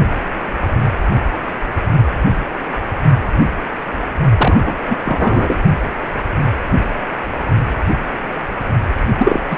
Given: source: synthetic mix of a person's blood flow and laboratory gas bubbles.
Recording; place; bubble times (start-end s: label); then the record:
Doppler ultrasound of blood flow; precordium
4.37-4.76 s: bubbles
4.89-4.97 s: bubbles
5.04-5.56 s: bubbles
9.19-9.41 s: bubbles
9.51-9.57 s: bubbles
From the record:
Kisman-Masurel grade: 223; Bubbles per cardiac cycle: several, 3 to 8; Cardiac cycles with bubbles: 10 to 50%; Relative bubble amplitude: loud (0.450 to 0.775); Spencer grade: 2 (many but less than half of the cardiac periods contain bubble signals, singularly or in groups); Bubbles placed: only in the low amplitude regions of the cardiac cycle